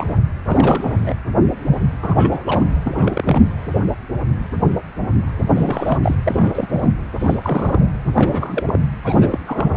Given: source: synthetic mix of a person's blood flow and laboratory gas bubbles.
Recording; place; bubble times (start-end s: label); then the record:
Doppler ultrasound of blood flow; precordium
0.00-0.18 s: bubbles
0.45-1.15 s: bubbles
2.02-2.63 s: bubbles
2.84-3.42 s: bubbles
5.55-5.98 s: bubbles
6.03-6.16 s: bubbles
6.25-6.90 s: bubbles
7.19-7.40 s: bubbles
7.43-7.89 s: bubbles
8.13-8.79 s: bubbles
9.04-9.38 s: bubbles
9.42-9.77 s: bubbles
From the record:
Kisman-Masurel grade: 332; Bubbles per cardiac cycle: rolling drumbeat, 9 or more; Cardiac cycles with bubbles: 50 to 99%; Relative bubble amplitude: moderate (0.250 to 0.450); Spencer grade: 3 (all of the cardiac periods contain showers or single bubble signals, but not dominating or overriding the cardiac motion signals); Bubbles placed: anywhere in the cardiac cycle